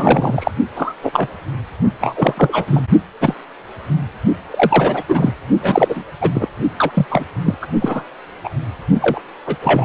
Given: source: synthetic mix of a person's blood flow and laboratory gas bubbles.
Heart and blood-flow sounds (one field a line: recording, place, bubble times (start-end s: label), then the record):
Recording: Doppler ultrasound of blood flow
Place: precordium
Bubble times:
0.00-0.51 s: bubbles
0.75-0.93 s: bubbles
1.02-1.28 s: bubbles
2.00-2.82 s: bubbles
3.20-3.35 s: bubbles
4.50-5.03 s: bubbles
5.08-5.34 s: bubbles
5.60-6.03 s: bubbles
6.21-6.30 s: bubbles
6.33-6.49 s: bubbles
6.76-6.91 s: bubbles
6.94-7.05 s: bubbles
7.11-7.26 s: bubbles
7.46-7.54 s: bubbles
7.62-7.67 s: bubbles
7.81-8.03 s: bubbles
8.44-8.50 s: bubbles
9.01-9.20 s: bubbles
9.46-9.55 s: bubbles
9.62-9.85 s: bubbles
From the record:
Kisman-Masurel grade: 243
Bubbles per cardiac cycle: several, 3 to 8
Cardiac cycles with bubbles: 100%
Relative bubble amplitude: loud (0.450 to 0.775)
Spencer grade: 3 (all of the cardiac periods contain showers or single bubble signals, but not dominating or overriding the cardiac motion signals)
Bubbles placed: only in the low amplitude regions of the cardiac cycle